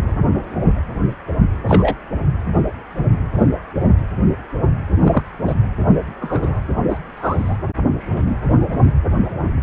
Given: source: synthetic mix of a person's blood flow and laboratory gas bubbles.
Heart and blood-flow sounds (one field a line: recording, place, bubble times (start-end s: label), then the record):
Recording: Doppler ultrasound of blood flow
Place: precordium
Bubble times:
1.68-1.94 s: bubbles
5.00-5.22 s: bubbles
5.46-5.55 s: bubbles
6.21-6.60 s: bubbles
6.90-6.98 s: bubbles
7.16-7.56 s: bubbles
7.98-8.39 s: bubbles
From the record:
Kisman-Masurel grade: 123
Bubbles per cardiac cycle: 1 to 2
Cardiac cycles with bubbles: 10 to 50%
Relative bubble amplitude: loud (0.450 to 0.775)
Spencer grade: 2 (many but less than half of the cardiac periods contain bubble signals, singularly or in groups)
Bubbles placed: anywhere in the cardiac cycle